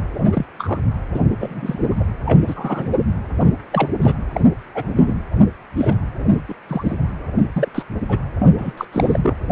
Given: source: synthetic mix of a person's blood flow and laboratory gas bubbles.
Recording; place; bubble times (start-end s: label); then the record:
Doppler ultrasound of blood flow; precordium
0.32-0.46 s: bubbles
0.58-0.79 s: bubbles
1.14-1.21 s: bubbles
1.30-1.36 s: bubbles
1.39-2.03 s: bubbles
2.25-2.92 s: bubbles
3.36-3.51 s: bubbles
3.72-3.89 s: bubbles
4.02-4.16 s: bubbles
4.33-4.41 s: bubbles
4.75-5.14 s: bubbles
5.77-5.96 s: bubbles
6.33-6.42 s: bubbles
6.49-6.54 s: bubbles
6.69-6.95 s: bubbles
7.56-7.69 s: bubbles
7.75-7.83 s: bubbles
8.09-8.19 s: bubbles
8.39-8.47 s: bubbles
8.58-8.73 s: bubbles
8.77-8.85 s: bubbles
8.92-9.20 s: bubbles
9.22-9.37 s: bubbles
From the record:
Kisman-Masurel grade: 242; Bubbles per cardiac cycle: several, 3 to 8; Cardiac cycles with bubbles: 100%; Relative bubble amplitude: moderate (0.250 to 0.450); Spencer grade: 3 (all of the cardiac periods contain showers or single bubble signals, but not dominating or overriding the cardiac motion signals); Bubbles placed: anywhere in the cardiac cycle